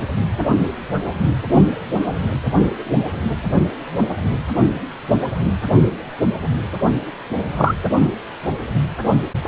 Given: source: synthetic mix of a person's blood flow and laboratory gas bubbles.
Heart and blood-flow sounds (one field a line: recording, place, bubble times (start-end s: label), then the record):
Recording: Doppler ultrasound of blood flow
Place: precordium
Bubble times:
7.56-7.74 s: bubbles
From the record:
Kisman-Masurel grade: 123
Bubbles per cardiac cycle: 1 to 2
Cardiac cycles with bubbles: 10 to 50%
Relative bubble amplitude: loud (0.450 to 0.775)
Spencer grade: 2 (many but less than half of the cardiac periods contain bubble signals, singularly or in groups)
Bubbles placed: only in the low amplitude regions of the cardiac cycle